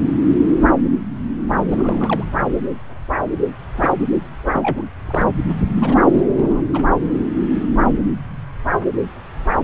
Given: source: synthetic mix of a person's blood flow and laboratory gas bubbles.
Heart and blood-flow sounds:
Doppler ultrasound of blood flow; subclavian vein
1.70-2.23 s: bubbles
3.75-3.92 s: bubbles
4.52-4.82 s: bubbles
5.07-5.25 s: bubbles
5.75-5.97 s: bubbles
6.13-6.22 s: bubbles
6.36-6.61 s: bubbles
6.73-6.84 s: bubbles
From the record:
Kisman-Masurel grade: 222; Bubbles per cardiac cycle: several, 3 to 8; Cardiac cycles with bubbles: 10 to 50%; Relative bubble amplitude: moderate (0.250 to 0.450); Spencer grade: 2 (many but less than half of the cardiac periods contain bubble signals, singularly or in groups); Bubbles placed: anywhere in the cardiac cycle

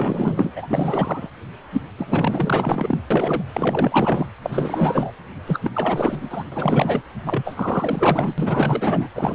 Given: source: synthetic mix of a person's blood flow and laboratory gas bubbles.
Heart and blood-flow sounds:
Doppler ultrasound of blood flow; precordium
0.00-0.53 s: bubbles
0.55-1.28 s: bubbles
1.72-1.82 s: bubbles
1.97-3.00 s: bubbles
3.10-3.42 s: bubbles
3.52-4.26 s: bubbles
4.42-5.12 s: bubbles
5.46-5.59 s: bubbles
5.62-5.71 s: bubbles
5.74-6.44 s: bubbles
6.51-7.02 s: bubbles
7.26-8.35 s: bubbles
8.38-9.07 s: bubbles
9.14-9.35 s: bubbles
From the record:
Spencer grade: 4 (maximum detectable bubble signal sounding continuously throughout systole and diastole of every cardiac period, and overriding the amplitude of the normal cardiac signals); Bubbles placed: anywhere in the cardiac cycle

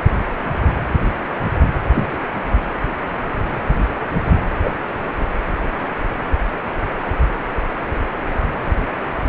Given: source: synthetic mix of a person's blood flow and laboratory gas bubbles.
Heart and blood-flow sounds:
Doppler ultrasound of blood flow; precordium
1.95-2.17 s: bubbles
4.64-4.70 s: bubbles
From the record:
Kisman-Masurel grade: 123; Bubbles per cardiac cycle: 1 to 2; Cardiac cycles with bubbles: 10 to 50%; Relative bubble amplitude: loud (0.450 to 0.775); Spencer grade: 2 (many but less than half of the cardiac periods contain bubble signals, singularly or in groups); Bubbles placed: anywhere in the cardiac cycle

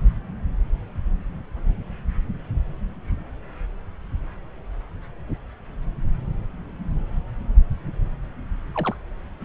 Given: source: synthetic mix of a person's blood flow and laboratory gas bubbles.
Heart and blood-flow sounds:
Doppler ultrasound of blood flow; subclavian vein
8.74-8.95 s: bubbles
From the record:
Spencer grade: 1 (occasional bubble signal discernible with the cardiac motion signal, with majority of cardiac periods free of bubbles); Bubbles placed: anywhere in the cardiac cycle

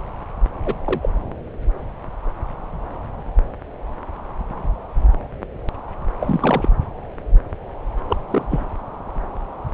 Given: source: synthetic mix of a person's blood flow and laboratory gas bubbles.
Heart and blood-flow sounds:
Doppler ultrasound of blood flow; subclavian vein
0.66-0.74 s: bubbles
0.85-1.09 s: bubbles
6.21-6.69 s: bubbles
8.09-8.17 s: bubbles
8.30-8.45 s: bubbles
8.50-8.66 s: bubbles
From the record:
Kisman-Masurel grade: 222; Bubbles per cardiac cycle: several, 3 to 8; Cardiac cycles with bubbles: 10 to 50%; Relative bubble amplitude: moderate (0.250 to 0.450); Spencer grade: 2 (many but less than half of the cardiac periods contain bubble signals, singularly or in groups); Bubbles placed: anywhere in the cardiac cycle

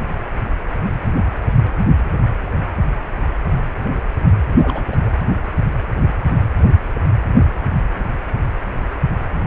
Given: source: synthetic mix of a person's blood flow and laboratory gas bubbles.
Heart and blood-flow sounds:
Doppler ultrasound of blood flow; precordium
4.58-4.85 s: bubbles
4.92-4.96 s: bubbles
5.05-5.09 s: bubbles
From the record:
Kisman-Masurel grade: 211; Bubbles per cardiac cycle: several, 3 to 8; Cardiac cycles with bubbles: 1 to 10%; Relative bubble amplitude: barely perceptible (0.100 to 0.250); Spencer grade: 1 (occasional bubble signal discernible with the cardiac motion signal, with majority of cardiac periods free of bubbles); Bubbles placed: anywhere in the cardiac cycle

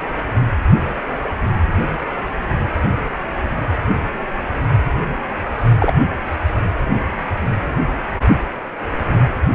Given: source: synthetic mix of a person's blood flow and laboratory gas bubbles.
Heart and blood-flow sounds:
Doppler ultrasound of blood flow; precordium
5.79-5.94 s: bubbles
From the record:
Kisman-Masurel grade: 123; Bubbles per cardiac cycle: 1 to 2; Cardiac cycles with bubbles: 10 to 50%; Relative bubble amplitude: loud (0.450 to 0.775); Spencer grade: 2 (many but less than half of the cardiac periods contain bubble signals, singularly or in groups); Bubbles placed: only in the low amplitude regions of the cardiac cycle

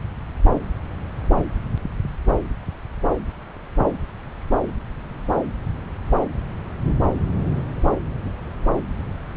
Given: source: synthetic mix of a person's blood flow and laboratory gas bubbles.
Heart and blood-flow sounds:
Doppler ultrasound of blood flow; subclavian vein
no bubbles
From the record:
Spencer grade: 0 (complete lack of bubble signals)

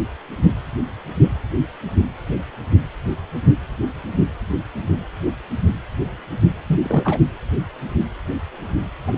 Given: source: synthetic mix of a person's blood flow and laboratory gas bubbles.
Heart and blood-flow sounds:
Doppler ultrasound of blood flow; precordium
6.68-6.81 s: bubbles
6.83-7.20 s: bubbles
9.06-9.18 s: bubbles
From the record:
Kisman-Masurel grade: 212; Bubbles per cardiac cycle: several, 3 to 8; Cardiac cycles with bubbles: 1 to 10%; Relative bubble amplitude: moderate (0.250 to 0.450); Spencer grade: 1 (occasional bubble signal discernible with the cardiac motion signal, with majority of cardiac periods free of bubbles); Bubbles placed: anywhere in the cardiac cycle

